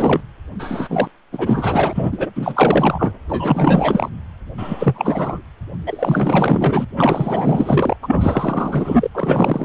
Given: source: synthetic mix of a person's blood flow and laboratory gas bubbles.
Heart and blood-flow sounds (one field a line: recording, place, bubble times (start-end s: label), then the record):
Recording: Doppler ultrasound of blood flow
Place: precordium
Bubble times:
0.00-0.21 s: bubbles
0.59-1.08 s: bubbles
1.32-2.29 s: bubbles
2.35-3.12 s: bubbles
3.29-4.09 s: bubbles
4.58-5.42 s: bubbles
5.87-6.85 s: bubbles
6.95-7.96 s: bubbles
8.03-9.09 s: bubbles
9.14-9.64 s: bubbles
From the record:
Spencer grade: 4 (maximum detectable bubble signal sounding continuously throughout systole and diastole of every cardiac period, and overriding the amplitude of the normal cardiac signals)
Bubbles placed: anywhere in the cardiac cycle